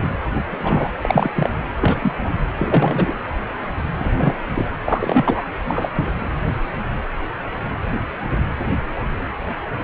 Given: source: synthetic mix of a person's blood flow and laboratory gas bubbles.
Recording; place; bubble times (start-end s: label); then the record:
Doppler ultrasound of blood flow; precordium
0.00-0.07 s: bubbles
0.50-0.91 s: bubbles
1.01-1.28 s: bubbles
1.34-1.49 s: bubbles
1.80-2.12 s: bubbles
2.23-2.29 s: bubbles
2.56-3.14 s: bubbles
3.98-4.11 s: bubbles
4.15-4.68 s: bubbles
4.85-5.42 s: bubbles
5.67-6.13 s: bubbles
From the record:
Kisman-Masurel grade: 233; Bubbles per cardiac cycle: several, 3 to 8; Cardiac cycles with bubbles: 50 to 99%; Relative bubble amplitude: loud (0.450 to 0.775); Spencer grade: 3 (all of the cardiac periods contain showers or single bubble signals, but not dominating or overriding the cardiac motion signals); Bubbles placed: anywhere in the cardiac cycle